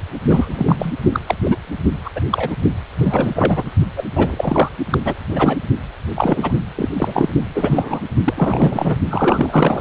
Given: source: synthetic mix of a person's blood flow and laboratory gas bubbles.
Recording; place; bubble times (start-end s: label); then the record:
Doppler ultrasound of blood flow; precordium
0.29-0.93 s: bubbles
1.13-1.20 s: bubbles
1.26-1.35 s: bubbles
1.43-1.57 s: bubbles
2.05-2.10 s: bubbles
2.16-2.21 s: bubbles
2.30-2.56 s: bubbles
2.97-3.70 s: bubbles
3.97-4.04 s: bubbles
4.15-4.69 s: bubbles
4.90-4.98 s: bubbles
5.04-5.14 s: bubbles
5.29-5.58 s: bubbles
6.15-6.52 s: bubbles
6.76-6.88 s: bubbles
6.96-7.29 s: bubbles
7.54-8.01 s: bubbles
8.23-8.98 s: bubbles
9.09-9.81 s: bubbles
From the record:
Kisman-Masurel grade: 343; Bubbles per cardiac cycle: rolling drumbeat, 9 or more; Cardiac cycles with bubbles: 100%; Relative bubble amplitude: loud (0.450 to 0.775); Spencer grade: 3 (all of the cardiac periods contain showers or single bubble signals, but not dominating or overriding the cardiac motion signals); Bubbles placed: only in the low amplitude regions of the cardiac cycle